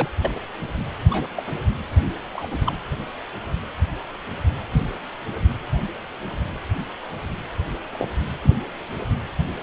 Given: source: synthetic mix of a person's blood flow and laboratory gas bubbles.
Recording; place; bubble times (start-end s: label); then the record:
Doppler ultrasound of blood flow; precordium
0.00-0.08 s: bubbles
0.21-0.31 s: bubbles
1.10-1.28 s: bubbles
1.37-1.44 s: bubbles
2.33-2.57 s: bubbles
2.65-2.73 s: bubbles
7.92-8.08 s: bubbles
8.43-8.57 s: bubbles
From the record:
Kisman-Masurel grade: 121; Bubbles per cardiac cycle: 1 to 2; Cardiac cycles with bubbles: 10 to 50%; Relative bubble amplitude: barely perceptible (0.100 to 0.250); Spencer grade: 2 (many but less than half of the cardiac periods contain bubble signals, singularly or in groups); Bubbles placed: anywhere in the cardiac cycle